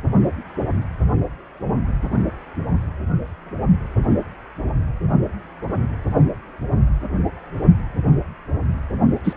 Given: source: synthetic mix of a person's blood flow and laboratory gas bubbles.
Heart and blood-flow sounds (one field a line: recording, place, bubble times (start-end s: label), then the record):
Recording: Doppler ultrasound of blood flow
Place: precordium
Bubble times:
9.23-9.33 s: bubbles
From the record:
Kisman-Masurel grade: 112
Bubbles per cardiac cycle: 1 to 2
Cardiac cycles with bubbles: 1 to 10%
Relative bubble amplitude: moderate (0.250 to 0.450)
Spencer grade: 1 (occasional bubble signal discernible with the cardiac motion signal, with majority of cardiac periods free of bubbles)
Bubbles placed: anywhere in the cardiac cycle